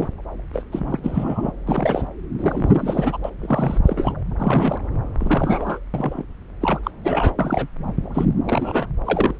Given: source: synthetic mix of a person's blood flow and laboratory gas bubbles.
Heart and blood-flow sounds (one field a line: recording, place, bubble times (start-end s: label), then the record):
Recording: Doppler ultrasound of blood flow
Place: subclavian vein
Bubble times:
0.00-0.08 s: bubbles
0.53-0.62 s: bubbles
0.72-1.00 s: bubbles
1.03-1.52 s: bubbles
1.67-2.07 s: bubbles
2.39-3.17 s: bubbles
3.24-3.30 s: bubbles
3.40-3.79 s: bubbles
3.85-4.16 s: bubbles
4.39-4.77 s: bubbles
5.21-5.79 s: bubbles
5.93-6.23 s: bubbles
6.61-6.79 s: bubbles
6.83-6.91 s: bubbles
7.04-7.33 s: bubbles
7.38-7.67 s: bubbles
8.14-8.25 s: bubbles
8.46-8.87 s: bubbles
9.06-9.37 s: bubbles
From the record:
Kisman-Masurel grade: 242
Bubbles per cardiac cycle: several, 3 to 8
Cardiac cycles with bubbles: 100%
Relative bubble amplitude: moderate (0.250 to 0.450)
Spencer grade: 3 (all of the cardiac periods contain showers or single bubble signals, but not dominating or overriding the cardiac motion signals)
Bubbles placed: anywhere in the cardiac cycle